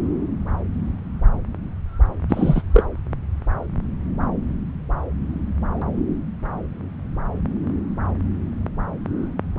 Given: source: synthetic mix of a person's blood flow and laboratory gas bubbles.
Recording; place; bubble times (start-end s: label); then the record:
Doppler ultrasound of blood flow; subclavian vein
2.29-2.62 s: bubbles
2.73-2.84 s: bubbles
From the record:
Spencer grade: 2 (many but less than half of the cardiac periods contain bubble signals, singularly or in groups); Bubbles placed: anywhere in the cardiac cycle